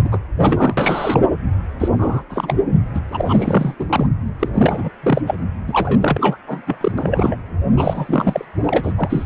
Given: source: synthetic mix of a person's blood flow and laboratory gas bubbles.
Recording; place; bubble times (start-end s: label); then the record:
Doppler ultrasound of blood flow; precordium
0.05-0.19 s: bubbles
0.35-1.21 s: bubbles
1.79-1.88 s: bubbles
1.96-2.24 s: bubbles
2.29-2.60 s: bubbles
2.94-3.00 s: bubbles
3.12-3.75 s: bubbles
3.79-4.06 s: bubbles
4.39-4.48 s: bubbles
4.51-4.89 s: bubbles
5.02-5.21 s: bubbles
5.26-5.34 s: bubbles
5.67-6.37 s: bubbles
6.47-6.61 s: bubbles
6.67-6.77 s: bubbles
6.80-6.92 s: bubbles
6.97-7.36 s: bubbles
7.76-8.45 s: bubbles
8.67-8.93 s: bubbles
8.96-9.26 s: bubbles
From the record:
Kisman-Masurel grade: 342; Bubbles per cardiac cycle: rolling drumbeat, 9 or more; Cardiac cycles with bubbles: 100%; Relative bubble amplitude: moderate (0.250 to 0.450); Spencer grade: 3 (all of the cardiac periods contain showers or single bubble signals, but not dominating or overriding the cardiac motion signals); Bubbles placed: anywhere in the cardiac cycle